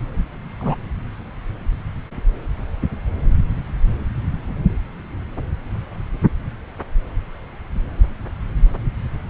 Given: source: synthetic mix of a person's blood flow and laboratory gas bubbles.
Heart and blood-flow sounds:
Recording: Doppler ultrasound of blood flow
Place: subclavian vein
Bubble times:
0.59-0.76 s: bubbles
From the record:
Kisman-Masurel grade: 212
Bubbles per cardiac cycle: several, 3 to 8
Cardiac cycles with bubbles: 1 to 10%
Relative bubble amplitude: moderate (0.250 to 0.450)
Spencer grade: 1 (occasional bubble signal discernible with the cardiac motion signal, with majority of cardiac periods free of bubbles)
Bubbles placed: anywhere in the cardiac cycle

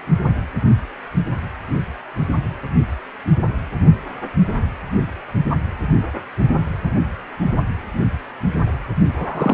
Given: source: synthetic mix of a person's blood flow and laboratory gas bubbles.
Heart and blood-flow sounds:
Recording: Doppler ultrasound of blood flow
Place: precordium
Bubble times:
9.18-9.54 s: bubbles
From the record:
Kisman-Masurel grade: 212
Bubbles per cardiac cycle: several, 3 to 8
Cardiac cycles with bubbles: 1 to 10%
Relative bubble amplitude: moderate (0.250 to 0.450)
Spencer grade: 1 (occasional bubble signal discernible with the cardiac motion signal, with majority of cardiac periods free of bubbles)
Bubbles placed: anywhere in the cardiac cycle

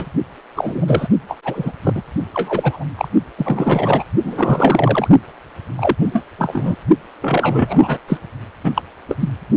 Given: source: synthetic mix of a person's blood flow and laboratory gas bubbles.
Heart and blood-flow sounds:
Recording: Doppler ultrasound of blood flow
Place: precordium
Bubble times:
0.00-0.05 s: bubbles
0.56-1.07 s: bubbles
1.28-1.39 s: bubbles
1.43-1.72 s: bubbles
1.83-2.02 s: bubbles
2.33-2.84 s: bubbles
2.97-3.08 s: bubbles
3.38-4.04 s: bubbles
4.23-5.08 s: bubbles
5.77-5.95 s: bubbles
6.00-6.24 s: bubbles
6.38-6.77 s: bubbles
7.21-7.98 s: bubbles
8.07-8.18 s: bubbles
8.64-8.72 s: bubbles
8.75-8.82 s: bubbles
9.08-9.15 s: bubbles
9.20-9.29 s: bubbles
From the record:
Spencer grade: 3 (all of the cardiac periods contain showers or single bubble signals, but not dominating or overriding the cardiac motion signals)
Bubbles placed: only in the low amplitude regions of the cardiac cycle

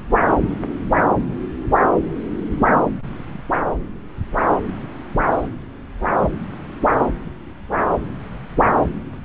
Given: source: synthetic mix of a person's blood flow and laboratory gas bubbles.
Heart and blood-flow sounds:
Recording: Doppler ultrasound of blood flow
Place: subclavian vein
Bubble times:
5.30-5.48 s: bubbles
From the record:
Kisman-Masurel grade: 111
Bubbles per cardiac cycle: 1 to 2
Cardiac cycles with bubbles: 1 to 10%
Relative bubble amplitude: barely perceptible (0.100 to 0.250)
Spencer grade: 1 (occasional bubble signal discernible with the cardiac motion signal, with majority of cardiac periods free of bubbles)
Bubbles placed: anywhere in the cardiac cycle

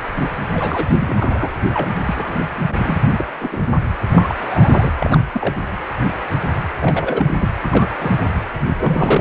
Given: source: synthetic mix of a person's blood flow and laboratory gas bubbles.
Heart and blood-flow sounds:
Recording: Doppler ultrasound of blood flow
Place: precordium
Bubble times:
0.54-0.92 s: bubbles
1.00-1.52 s: bubbles
1.74-1.93 s: bubbles
2.06-2.45 s: bubbles
2.69-2.98 s: bubbles
3.18-3.25 s: bubbles
3.40-3.49 s: bubbles
3.51-3.72 s: bubbles
4.10-4.35 s: bubbles
4.39-4.90 s: bubbles
5.00-5.20 s: bubbles
5.33-5.56 s: bubbles
6.81-7.35 s: bubbles
7.38-7.49 s: bubbles
7.62-7.88 s: bubbles
7.98-8.27 s: bubbles
8.77-9.21 s: bubbles
From the record:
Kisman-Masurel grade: 232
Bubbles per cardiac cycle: several, 3 to 8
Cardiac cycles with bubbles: 50 to 99%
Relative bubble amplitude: moderate (0.250 to 0.450)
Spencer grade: 3 (all of the cardiac periods contain showers or single bubble signals, but not dominating or overriding the cardiac motion signals)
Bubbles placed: anywhere in the cardiac cycle

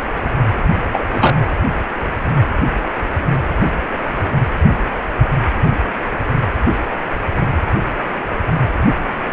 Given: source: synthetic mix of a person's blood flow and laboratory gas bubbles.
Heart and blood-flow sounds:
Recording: Doppler ultrasound of blood flow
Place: precordium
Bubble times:
0.93-1.05 s: bubbles
1.14-1.35 s: bubbles
From the record:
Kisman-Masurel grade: 213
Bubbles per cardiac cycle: several, 3 to 8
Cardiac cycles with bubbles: 1 to 10%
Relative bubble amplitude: loud (0.450 to 0.775)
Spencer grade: 1 (occasional bubble signal discernible with the cardiac motion signal, with majority of cardiac periods free of bubbles)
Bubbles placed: anywhere in the cardiac cycle

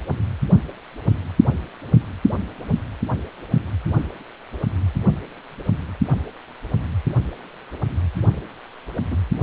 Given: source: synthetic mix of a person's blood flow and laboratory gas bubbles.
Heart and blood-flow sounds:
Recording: Doppler ultrasound of blood flow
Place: precordium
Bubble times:
8.21-8.28 s: bubbles
9.11-9.17 s: bubbles
From the record:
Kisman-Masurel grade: 111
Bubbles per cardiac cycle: 1 to 2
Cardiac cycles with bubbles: 1 to 10%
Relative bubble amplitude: barely perceptible (0.100 to 0.250)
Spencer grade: 1 (occasional bubble signal discernible with the cardiac motion signal, with majority of cardiac periods free of bubbles)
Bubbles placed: anywhere in the cardiac cycle

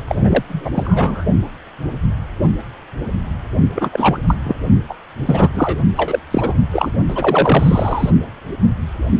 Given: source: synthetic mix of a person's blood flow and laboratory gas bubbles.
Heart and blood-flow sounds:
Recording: Doppler ultrasound of blood flow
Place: precordium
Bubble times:
0.08-0.15 s: bubbles
0.21-0.45 s: bubbles
0.49-0.70 s: bubbles
0.74-1.25 s: bubbles
3.75-4.18 s: bubbles
4.26-4.36 s: bubbles
4.44-4.56 s: bubbles
4.89-4.94 s: bubbles
5.26-5.49 s: bubbles
5.54-5.80 s: bubbles
5.96-6.19 s: bubbles
6.31-6.54 s: bubbles
6.73-6.92 s: bubbles
7.08-8.11 s: bubbles
From the record:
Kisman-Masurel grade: 333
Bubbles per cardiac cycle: rolling drumbeat, 9 or more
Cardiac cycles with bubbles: 50 to 99%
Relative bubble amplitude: loud (0.450 to 0.775)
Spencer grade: 3 (all of the cardiac periods contain showers or single bubble signals, but not dominating or overriding the cardiac motion signals)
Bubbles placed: only in the low amplitude regions of the cardiac cycle

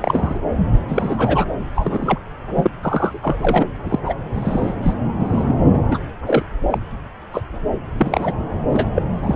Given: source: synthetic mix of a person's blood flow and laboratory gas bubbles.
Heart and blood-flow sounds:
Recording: Doppler ultrasound of blood flow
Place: subclavian vein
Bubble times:
0.01-0.40 s: bubbles
0.89-1.45 s: bubbles
1.75-2.19 s: bubbles
2.55-2.71 s: bubbles
2.81-3.19 s: bubbles
3.22-3.66 s: bubbles
3.83-3.99 s: bubbles
4.05-4.14 s: bubbles
4.35-4.74 s: bubbles
4.83-4.93 s: bubbles
5.19-5.56 s: bubbles
5.73-5.79 s: bubbles
5.91-5.98 s: bubbles
6.26-6.43 s: bubbles
6.70-6.78 s: bubbles
7.32-7.43 s: bubbles
7.99-8.32 s: bubbles
8.67-8.87 s: bubbles
8.95-9.03 s: bubbles
9.22-9.35 s: bubbles
From the record:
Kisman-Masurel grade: 243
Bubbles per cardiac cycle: several, 3 to 8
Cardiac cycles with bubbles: 100%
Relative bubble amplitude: loud (0.450 to 0.775)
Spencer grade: 3 (all of the cardiac periods contain showers or single bubble signals, but not dominating or overriding the cardiac motion signals)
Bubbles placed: anywhere in the cardiac cycle

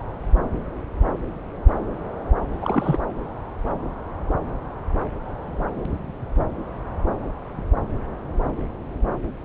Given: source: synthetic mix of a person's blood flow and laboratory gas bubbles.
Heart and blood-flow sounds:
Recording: Doppler ultrasound of blood flow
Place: subclavian vein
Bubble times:
2.60-3.00 s: bubbles
From the record:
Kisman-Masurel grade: 211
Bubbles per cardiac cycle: several, 3 to 8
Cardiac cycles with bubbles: 1 to 10%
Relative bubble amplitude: barely perceptible (0.100 to 0.250)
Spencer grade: 1 (occasional bubble signal discernible with the cardiac motion signal, with majority of cardiac periods free of bubbles)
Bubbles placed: anywhere in the cardiac cycle

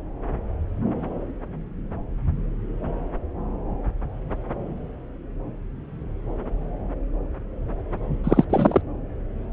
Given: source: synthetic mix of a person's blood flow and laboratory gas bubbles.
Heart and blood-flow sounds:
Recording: Doppler ultrasound of blood flow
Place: subclavian vein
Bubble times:
8.24-8.45 s: bubbles
8.50-8.82 s: bubbles
From the record:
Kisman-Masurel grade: 213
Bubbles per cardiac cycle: several, 3 to 8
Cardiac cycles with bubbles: 1 to 10%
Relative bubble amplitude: loud (0.450 to 0.775)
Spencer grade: 1 (occasional bubble signal discernible with the cardiac motion signal, with majority of cardiac periods free of bubbles)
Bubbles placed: anywhere in the cardiac cycle

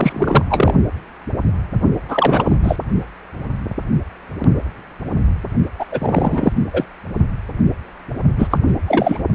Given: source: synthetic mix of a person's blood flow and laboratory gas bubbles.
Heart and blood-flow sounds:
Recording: Doppler ultrasound of blood flow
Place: precordium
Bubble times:
0.00-0.45 s: bubbles
0.49-0.74 s: bubbles
2.08-2.56 s: bubbles
2.62-2.76 s: bubbles
5.79-5.85 s: bubbles
5.91-6.52 s: bubbles
6.73-6.84 s: bubbles
8.37-8.47 s: bubbles
8.50-8.58 s: bubbles
8.67-8.74 s: bubbles
8.86-9.22 s: bubbles
From the record:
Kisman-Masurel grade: 333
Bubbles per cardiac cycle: rolling drumbeat, 9 or more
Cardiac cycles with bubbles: 50 to 99%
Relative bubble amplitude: loud (0.450 to 0.775)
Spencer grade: 3 (all of the cardiac periods contain showers or single bubble signals, but not dominating or overriding the cardiac motion signals)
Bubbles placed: only in the low amplitude regions of the cardiac cycle

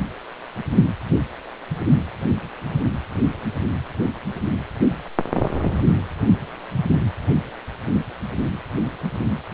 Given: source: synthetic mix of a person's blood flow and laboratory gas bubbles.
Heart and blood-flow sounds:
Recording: Doppler ultrasound of blood flow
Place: precordium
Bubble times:
no bubbles
From the record:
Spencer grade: 0 (complete lack of bubble signals)

